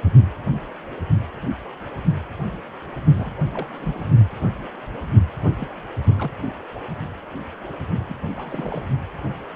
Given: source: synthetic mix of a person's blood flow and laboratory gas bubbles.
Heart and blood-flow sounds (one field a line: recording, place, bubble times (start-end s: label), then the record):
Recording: Doppler ultrasound of blood flow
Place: precordium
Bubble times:
3.18-3.31 s: bubbles
3.38-3.42 s: bubbles
3.54-3.67 s: bubbles
3.71-4.05 s: bubbles
5.43-5.67 s: bubbles
6.07-6.14 s: bubbles
6.17-6.30 s: bubbles
8.09-8.14 s: bubbles
8.22-8.28 s: bubbles
8.37-8.83 s: bubbles
From the record:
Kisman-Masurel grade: 221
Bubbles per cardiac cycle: several, 3 to 8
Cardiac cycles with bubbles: 10 to 50%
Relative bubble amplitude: barely perceptible (0.100 to 0.250)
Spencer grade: 2 (many but less than half of the cardiac periods contain bubble signals, singularly or in groups)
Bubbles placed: only in the low amplitude regions of the cardiac cycle